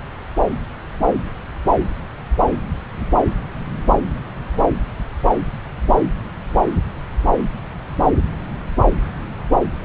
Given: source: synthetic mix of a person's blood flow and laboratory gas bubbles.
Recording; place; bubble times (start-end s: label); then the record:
Doppler ultrasound of blood flow; subclavian vein
no bubbles
From the record:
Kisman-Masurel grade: 000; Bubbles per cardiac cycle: 0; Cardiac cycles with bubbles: 0%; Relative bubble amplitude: no bubbles discernible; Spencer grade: 0 (complete lack of bubble signals)